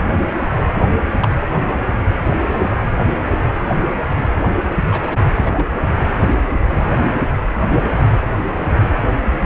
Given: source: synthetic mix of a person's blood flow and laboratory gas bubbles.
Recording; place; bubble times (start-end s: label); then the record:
Doppler ultrasound of blood flow; precordium
1.20-1.28 s: bubbles
2.25-2.35 s: bubbles
2.46-2.71 s: bubbles
3.10-3.15 s: bubbles
3.19-3.24 s: bubbles
4.90-5.27 s: bubbles
5.31-5.65 s: bubbles
From the record:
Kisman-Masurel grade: 222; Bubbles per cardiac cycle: several, 3 to 8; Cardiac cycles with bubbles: 10 to 50%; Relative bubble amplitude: moderate (0.250 to 0.450); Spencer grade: 2 (many but less than half of the cardiac periods contain bubble signals, singularly or in groups); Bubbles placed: anywhere in the cardiac cycle